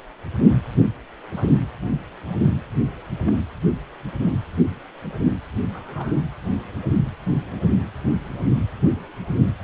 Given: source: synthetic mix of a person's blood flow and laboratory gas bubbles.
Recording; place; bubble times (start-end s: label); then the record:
Doppler ultrasound of blood flow; precordium
1.31-1.44 s: bubbles
3.25-3.32 s: bubbles
5.74-6.17 s: bubbles
From the record:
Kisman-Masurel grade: 121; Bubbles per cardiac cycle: 1 to 2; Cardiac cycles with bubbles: 10 to 50%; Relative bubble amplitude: barely perceptible (0.100 to 0.250); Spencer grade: 2 (many but less than half of the cardiac periods contain bubble signals, singularly or in groups); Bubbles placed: anywhere in the cardiac cycle